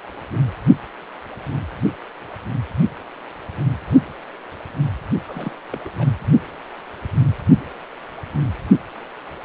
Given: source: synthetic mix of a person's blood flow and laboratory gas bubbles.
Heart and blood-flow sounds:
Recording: Doppler ultrasound of blood flow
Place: precordium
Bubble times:
5.26-5.51 s: bubbles
5.72-5.78 s: bubbles
5.84-5.90 s: bubbles
5.97-6.09 s: bubbles
From the record:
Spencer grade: 1 (occasional bubble signal discernible with the cardiac motion signal, with majority of cardiac periods free of bubbles)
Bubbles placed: only in the low amplitude regions of the cardiac cycle

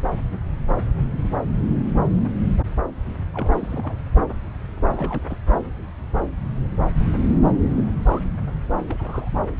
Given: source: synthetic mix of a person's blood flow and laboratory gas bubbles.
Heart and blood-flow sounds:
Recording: Doppler ultrasound of blood flow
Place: subclavian vein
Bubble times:
3.33-3.51 s: bubbles
3.54-3.96 s: bubbles
4.87-5.24 s: bubbles
5.28-5.38 s: bubbles
7.75-7.83 s: bubbles
8.03-8.25 s: bubbles
8.87-9.30 s: bubbles
From the record:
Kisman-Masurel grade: 221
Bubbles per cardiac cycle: several, 3 to 8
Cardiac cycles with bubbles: 10 to 50%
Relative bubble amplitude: barely perceptible (0.100 to 0.250)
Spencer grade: 2 (many but less than half of the cardiac periods contain bubble signals, singularly or in groups)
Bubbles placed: anywhere in the cardiac cycle

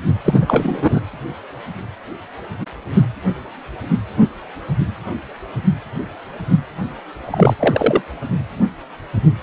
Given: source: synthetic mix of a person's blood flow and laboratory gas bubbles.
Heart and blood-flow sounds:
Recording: Doppler ultrasound of blood flow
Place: precordium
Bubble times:
0.25-1.00 s: bubbles
7.25-7.54 s: bubbles
7.59-8.01 s: bubbles
From the record:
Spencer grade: 2 (many but less than half of the cardiac periods contain bubble signals, singularly or in groups)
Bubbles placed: anywhere in the cardiac cycle

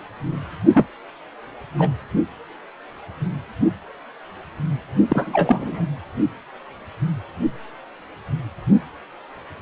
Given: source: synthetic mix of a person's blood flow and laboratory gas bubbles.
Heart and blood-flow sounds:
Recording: Doppler ultrasound of blood flow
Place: precordium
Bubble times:
0.74-0.88 s: bubbles
1.78-1.91 s: bubbles
5.08-5.85 s: bubbles
From the record:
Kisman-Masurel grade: 223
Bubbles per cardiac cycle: several, 3 to 8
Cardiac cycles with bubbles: 10 to 50%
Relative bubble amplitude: loud (0.450 to 0.775)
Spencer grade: 2 (many but less than half of the cardiac periods contain bubble signals, singularly or in groups)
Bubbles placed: only in the low amplitude regions of the cardiac cycle

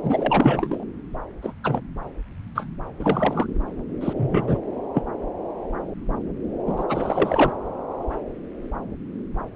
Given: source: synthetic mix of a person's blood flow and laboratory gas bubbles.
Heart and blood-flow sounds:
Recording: Doppler ultrasound of blood flow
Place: subclavian vein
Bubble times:
0.03-0.84 s: bubbles
1.42-1.52 s: bubbles
1.64-1.81 s: bubbles
2.55-2.65 s: bubbles
3.00-3.47 s: bubbles
4.00-4.13 s: bubbles
4.16-4.58 s: bubbles
4.95-5.03 s: bubbles
6.67-6.85 s: bubbles
6.88-7.51 s: bubbles
From the record:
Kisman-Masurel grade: 232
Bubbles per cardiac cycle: several, 3 to 8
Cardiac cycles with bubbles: 50 to 99%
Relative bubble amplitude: moderate (0.250 to 0.450)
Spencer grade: 3 (all of the cardiac periods contain showers or single bubble signals, but not dominating or overriding the cardiac motion signals)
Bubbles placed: anywhere in the cardiac cycle

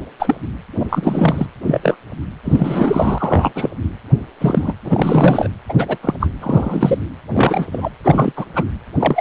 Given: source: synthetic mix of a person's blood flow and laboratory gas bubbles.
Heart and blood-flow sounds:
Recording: Doppler ultrasound of blood flow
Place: precordium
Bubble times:
0.19-0.36 s: bubbles
0.79-0.85 s: bubbles
0.89-1.46 s: bubbles
1.67-1.97 s: bubbles
2.45-3.52 s: bubbles
3.55-3.70 s: bubbles
4.41-4.74 s: bubbles
4.84-5.48 s: bubbles
5.69-5.74 s: bubbles
5.78-5.98 s: bubbles
6.02-6.14 s: bubbles
6.20-6.28 s: bubbles
6.41-6.98 s: bubbles
7.33-7.66 s: bubbles
7.72-7.90 s: bubbles
8.04-8.32 s: bubbles
8.36-8.46 s: bubbles
8.55-8.63 s: bubbles
8.99-9.21 s: bubbles
From the record:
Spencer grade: 3 (all of the cardiac periods contain showers or single bubble signals, but not dominating or overriding the cardiac motion signals)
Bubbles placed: anywhere in the cardiac cycle

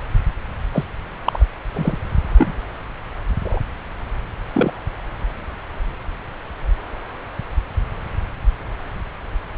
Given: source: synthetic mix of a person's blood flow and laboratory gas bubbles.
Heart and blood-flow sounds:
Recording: Doppler ultrasound of blood flow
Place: subclavian vein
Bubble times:
0.72-0.85 s: bubbles
1.23-1.46 s: bubbles
1.73-1.97 s: bubbles
2.38-2.55 s: bubbles
3.44-3.59 s: bubbles
4.54-4.71 s: bubbles
From the record:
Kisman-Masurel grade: 122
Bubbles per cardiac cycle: 1 to 2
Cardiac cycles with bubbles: 10 to 50%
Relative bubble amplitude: moderate (0.250 to 0.450)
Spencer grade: 2 (many but less than half of the cardiac periods contain bubble signals, singularly or in groups)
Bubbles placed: anywhere in the cardiac cycle

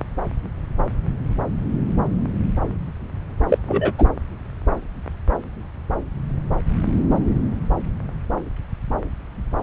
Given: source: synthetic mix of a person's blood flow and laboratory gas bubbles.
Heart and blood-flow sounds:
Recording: Doppler ultrasound of blood flow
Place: subclavian vein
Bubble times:
3.48-3.58 s: bubbles
3.67-3.94 s: bubbles
3.98-4.06 s: bubbles
From the record:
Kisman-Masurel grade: 213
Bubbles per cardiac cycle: several, 3 to 8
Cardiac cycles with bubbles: 1 to 10%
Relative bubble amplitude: loud (0.450 to 0.775)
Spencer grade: 1 (occasional bubble signal discernible with the cardiac motion signal, with majority of cardiac periods free of bubbles)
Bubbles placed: anywhere in the cardiac cycle

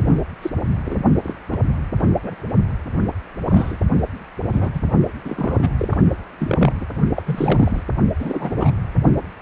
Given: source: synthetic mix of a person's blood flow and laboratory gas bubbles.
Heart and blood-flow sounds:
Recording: Doppler ultrasound of blood flow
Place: precordium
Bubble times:
0.01-0.28 s: bubbles
0.42-0.51 s: bubbles
0.85-0.99 s: bubbles
1.24-1.35 s: bubbles
1.49-1.57 s: bubbles
1.99-2.07 s: bubbles
2.23-2.36 s: bubbles
3.49-3.77 s: bubbles
4.46-4.71 s: bubbles
4.74-4.81 s: bubbles
5.25-5.68 s: bubbles
5.77-5.97 s: bubbles
6.39-6.73 s: bubbles
6.80-6.85 s: bubbles
7.15-7.22 s: bubbles
7.25-7.83 s: bubbles
8.20-8.71 s: bubbles
From the record:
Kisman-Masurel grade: 242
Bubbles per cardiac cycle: several, 3 to 8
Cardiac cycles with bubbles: 100%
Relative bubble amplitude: moderate (0.250 to 0.450)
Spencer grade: 3 (all of the cardiac periods contain showers or single bubble signals, but not dominating or overriding the cardiac motion signals)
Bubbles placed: only in the low amplitude regions of the cardiac cycle

